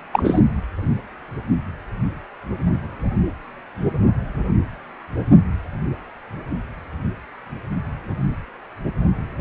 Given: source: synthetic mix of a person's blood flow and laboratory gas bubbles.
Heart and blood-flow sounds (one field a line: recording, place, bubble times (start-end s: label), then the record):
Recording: Doppler ultrasound of blood flow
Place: precordium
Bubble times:
0.13-0.40 s: bubbles
From the record:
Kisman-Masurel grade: 213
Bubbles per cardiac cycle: several, 3 to 8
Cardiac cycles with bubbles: 1 to 10%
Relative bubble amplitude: loud (0.450 to 0.775)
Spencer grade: 1 (occasional bubble signal discernible with the cardiac motion signal, with majority of cardiac periods free of bubbles)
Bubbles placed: only in the low amplitude regions of the cardiac cycle